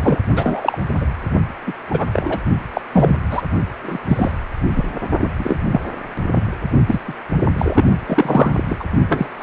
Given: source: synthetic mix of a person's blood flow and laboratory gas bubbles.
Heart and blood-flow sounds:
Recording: Doppler ultrasound of blood flow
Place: precordium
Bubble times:
0.01-0.18 s: bubbles
0.35-0.78 s: bubbles
0.96-1.06 s: bubbles
1.67-1.73 s: bubbles
1.90-2.07 s: bubbles
2.12-2.39 s: bubbles
2.73-2.81 s: bubbles
2.92-3.16 s: bubbles
3.30-3.42 s: bubbles
3.83-3.99 s: bubbles
4.08-4.31 s: bubbles
4.75-4.92 s: bubbles
5.20-5.29 s: bubbles
5.38-5.56 s: bubbles
5.64-5.80 s: bubbles
6.34-6.43 s: bubbles
6.86-7.00 s: bubbles
7.07-7.13 s: bubbles
7.58-7.83 s: bubbles
8.07-8.64 s: bubbles
8.68-8.84 s: bubbles
9.08-9.28 s: bubbles
9.39-9.43 s: bubbles
From the record:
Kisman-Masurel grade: 243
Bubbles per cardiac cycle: several, 3 to 8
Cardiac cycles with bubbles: 100%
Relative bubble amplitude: loud (0.450 to 0.775)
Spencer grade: 3 (all of the cardiac periods contain showers or single bubble signals, but not dominating or overriding the cardiac motion signals)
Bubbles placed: only in the low amplitude regions of the cardiac cycle

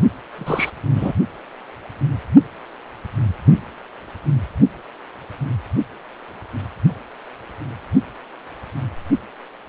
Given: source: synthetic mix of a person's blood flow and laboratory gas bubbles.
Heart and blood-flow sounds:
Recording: Doppler ultrasound of blood flow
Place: precordium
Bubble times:
0.34-0.70 s: bubbles
0.94-1.12 s: bubbles
From the record:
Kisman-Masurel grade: 223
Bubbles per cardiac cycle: several, 3 to 8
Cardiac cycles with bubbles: 10 to 50%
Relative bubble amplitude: loud (0.450 to 0.775)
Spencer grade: 2 (many but less than half of the cardiac periods contain bubble signals, singularly or in groups)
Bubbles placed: only in the low amplitude regions of the cardiac cycle

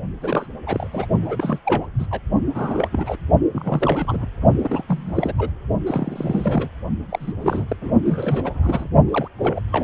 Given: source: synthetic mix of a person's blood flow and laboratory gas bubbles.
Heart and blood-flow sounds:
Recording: Doppler ultrasound of blood flow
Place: precordium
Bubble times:
0.21-0.46 s: bubbles
0.67-0.87 s: bubbles
0.91-1.06 s: bubbles
1.21-1.59 s: bubbles
1.65-1.86 s: bubbles
1.98-2.06 s: bubbles
2.10-2.21 s: bubbles
2.54-2.88 s: bubbles
2.92-3.16 s: bubbles
3.52-4.26 s: bubbles
4.64-4.83 s: bubbles
4.88-5.33 s: bubbles
5.37-5.51 s: bubbles
5.86-6.69 s: bubbles
7.10-7.33 s: bubbles
7.41-7.76 s: bubbles
7.81-7.91 s: bubbles
8.05-8.88 s: bubbles
9.08-9.28 s: bubbles
9.38-9.60 s: bubbles
9.72-9.84 s: bubbles
From the record:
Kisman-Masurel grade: 342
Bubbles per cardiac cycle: rolling drumbeat, 9 or more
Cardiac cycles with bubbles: 100%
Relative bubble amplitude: moderate (0.250 to 0.450)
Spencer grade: 3 (all of the cardiac periods contain showers or single bubble signals, but not dominating or overriding the cardiac motion signals)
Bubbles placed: only in the low amplitude regions of the cardiac cycle

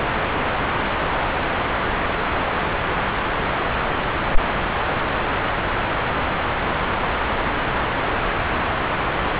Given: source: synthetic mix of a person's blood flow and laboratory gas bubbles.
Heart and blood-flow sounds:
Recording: Doppler ultrasound of blood flow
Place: subclavian vein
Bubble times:
no bubbles
From the record:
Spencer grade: 0 (complete lack of bubble signals)

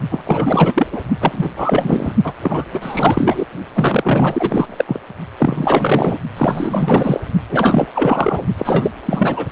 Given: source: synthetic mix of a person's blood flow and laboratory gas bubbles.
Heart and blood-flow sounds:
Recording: Doppler ultrasound of blood flow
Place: precordium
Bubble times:
0.10-0.87 s: bubbles
0.92-1.02 s: bubbles
1.20-1.49 s: bubbles
1.57-2.14 s: bubbles
2.24-2.33 s: bubbles
2.42-2.66 s: bubbles
2.72-3.46 s: bubbles
3.74-4.84 s: bubbles
4.87-5.00 s: bubbles
5.38-6.19 s: bubbles
6.37-7.20 s: bubbles
7.48-7.87 s: bubbles
7.94-8.45 s: bubbles
8.57-8.91 s: bubbles
9.05-9.45 s: bubbles
From the record:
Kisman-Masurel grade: 444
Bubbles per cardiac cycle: continuous sound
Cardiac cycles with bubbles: 100%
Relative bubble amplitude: maximal (0.775 to 0.999)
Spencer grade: 4 (maximum detectable bubble signal sounding continuously throughout systole and diastole of every cardiac period, and overriding the amplitude of the normal cardiac signals)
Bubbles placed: only in the low amplitude regions of the cardiac cycle

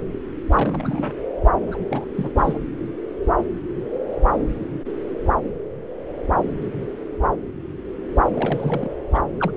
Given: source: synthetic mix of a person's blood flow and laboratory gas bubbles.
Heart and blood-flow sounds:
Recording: Doppler ultrasound of blood flow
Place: subclavian vein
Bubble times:
0.51-1.14 s: bubbles
1.67-1.77 s: bubbles
1.91-2.05 s: bubbles
2.15-2.29 s: bubbles
2.37-2.58 s: bubbles
8.34-8.92 s: bubbles
9.14-9.23 s: bubbles
9.39-9.51 s: bubbles
From the record:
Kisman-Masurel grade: 221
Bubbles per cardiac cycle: several, 3 to 8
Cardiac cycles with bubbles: 10 to 50%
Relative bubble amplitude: barely perceptible (0.100 to 0.250)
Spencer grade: 2 (many but less than half of the cardiac periods contain bubble signals, singularly or in groups)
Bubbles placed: anywhere in the cardiac cycle

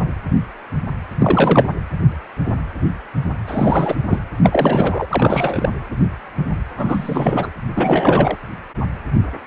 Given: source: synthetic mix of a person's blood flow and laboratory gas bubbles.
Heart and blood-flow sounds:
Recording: Doppler ultrasound of blood flow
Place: precordium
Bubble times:
1.19-1.66 s: bubbles
3.47-3.96 s: bubbles
4.10-4.19 s: bubbles
4.42-5.06 s: bubbles
5.09-5.70 s: bubbles
6.77-7.53 s: bubbles
7.75-8.37 s: bubbles
From the record:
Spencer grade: 3 (all of the cardiac periods contain showers or single bubble signals, but not dominating or overriding the cardiac motion signals)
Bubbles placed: anywhere in the cardiac cycle

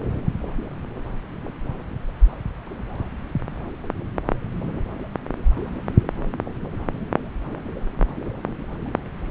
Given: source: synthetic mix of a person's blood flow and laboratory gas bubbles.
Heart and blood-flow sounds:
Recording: Doppler ultrasound of blood flow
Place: subclavian vein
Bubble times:
no bubbles
From the record:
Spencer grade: 0 (complete lack of bubble signals)

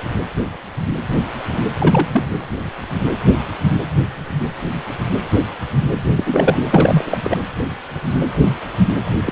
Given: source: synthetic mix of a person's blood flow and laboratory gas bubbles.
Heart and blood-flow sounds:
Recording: Doppler ultrasound of blood flow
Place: precordium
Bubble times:
1.80-2.08 s: bubbles
2.13-2.25 s: bubbles
6.17-6.58 s: bubbles
6.70-7.04 s: bubbles
7.09-7.17 s: bubbles
7.23-7.38 s: bubbles
9.21-9.32 s: bubbles
From the record:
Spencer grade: 2 (many but less than half of the cardiac periods contain bubble signals, singularly or in groups)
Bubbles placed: anywhere in the cardiac cycle

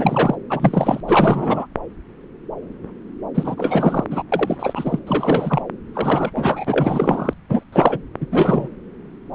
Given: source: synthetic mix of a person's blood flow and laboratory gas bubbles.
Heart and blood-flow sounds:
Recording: Doppler ultrasound of blood flow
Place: subclavian vein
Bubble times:
0.00-0.36 s: bubbles
0.49-1.00 s: bubbles
1.07-1.67 s: bubbles
3.34-4.04 s: bubbles
4.10-4.23 s: bubbles
4.32-4.56 s: bubbles
4.59-5.00 s: bubbles
5.06-5.62 s: bubbles
5.93-6.30 s: bubbles
6.34-7.33 s: bubbles
7.49-7.63 s: bubbles
7.72-7.98 s: bubbles
8.21-8.27 s: bubbles
8.31-8.68 s: bubbles
From the record:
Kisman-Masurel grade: 333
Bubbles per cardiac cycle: rolling drumbeat, 9 or more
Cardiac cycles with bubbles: 50 to 99%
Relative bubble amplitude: loud (0.450 to 0.775)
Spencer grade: 3 (all of the cardiac periods contain showers or single bubble signals, but not dominating or overriding the cardiac motion signals)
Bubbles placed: anywhere in the cardiac cycle

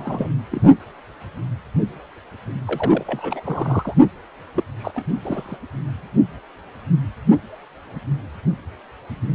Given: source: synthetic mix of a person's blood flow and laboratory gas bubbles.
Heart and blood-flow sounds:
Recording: Doppler ultrasound of blood flow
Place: precordium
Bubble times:
0.00-0.30 s: bubbles
0.51-0.60 s: bubbles
2.67-3.41 s: bubbles
3.44-3.94 s: bubbles
4.55-4.63 s: bubbles
4.79-4.92 s: bubbles
4.95-5.09 s: bubbles
5.23-5.57 s: bubbles
From the record:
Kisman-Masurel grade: 232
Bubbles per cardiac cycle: several, 3 to 8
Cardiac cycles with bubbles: 50 to 99%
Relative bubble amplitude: moderate (0.250 to 0.450)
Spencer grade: 3 (all of the cardiac periods contain showers or single bubble signals, but not dominating or overriding the cardiac motion signals)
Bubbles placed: only in the low amplitude regions of the cardiac cycle

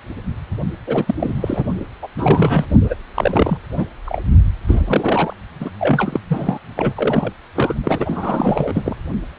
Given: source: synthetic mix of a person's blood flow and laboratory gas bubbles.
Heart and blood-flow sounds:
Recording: Doppler ultrasound of blood flow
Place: precordium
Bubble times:
0.86-1.15 s: bubbles
1.20-1.64 s: bubbles
2.02-2.08 s: bubbles
2.18-2.65 s: bubbles
2.83-2.96 s: bubbles
3.15-3.58 s: bubbles
3.77-3.86 s: bubbles
4.06-4.21 s: bubbles
4.67-5.33 s: bubbles
5.60-5.70 s: bubbles
5.79-6.20 s: bubbles
6.29-6.58 s: bubbles
6.77-7.32 s: bubbles
7.55-7.75 s: bubbles
7.83-8.96 s: bubbles
From the record:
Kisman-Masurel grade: 332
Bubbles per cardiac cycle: rolling drumbeat, 9 or more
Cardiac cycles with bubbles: 50 to 99%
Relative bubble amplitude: moderate (0.250 to 0.450)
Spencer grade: 3 (all of the cardiac periods contain showers or single bubble signals, but not dominating or overriding the cardiac motion signals)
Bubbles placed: only in the low amplitude regions of the cardiac cycle

